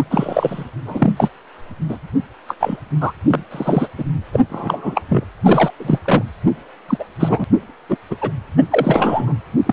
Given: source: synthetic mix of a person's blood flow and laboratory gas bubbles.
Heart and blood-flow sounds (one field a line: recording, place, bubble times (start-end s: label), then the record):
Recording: Doppler ultrasound of blood flow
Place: precordium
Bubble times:
0.00-0.03 s: bubbles
0.10-0.64 s: bubbles
0.85-1.12 s: bubbles
1.17-1.29 s: bubbles
1.89-1.97 s: bubbles
2.48-2.55 s: bubbles
2.60-2.77 s: bubbles
3.01-3.12 s: bubbles
3.27-3.43 s: bubbles
3.51-3.88 s: bubbles
3.98-4.04 s: bubbles
4.32-4.40 s: bubbles
4.50-5.02 s: bubbles
5.08-5.24 s: bubbles
5.43-5.71 s: bubbles
5.79-5.98 s: bubbles
6.04-6.23 s: bubbles
6.88-7.04 s: bubbles
7.19-7.44 s: bubbles
7.89-7.97 s: bubbles
8.10-8.16 s: bubbles
8.21-8.31 s: bubbles
8.57-8.63 s: bubbles
8.71-9.33 s: bubbles
9.66-9.73 s: bubbles
From the record:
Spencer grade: 3 (all of the cardiac periods contain showers or single bubble signals, but not dominating or overriding the cardiac motion signals)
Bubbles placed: anywhere in the cardiac cycle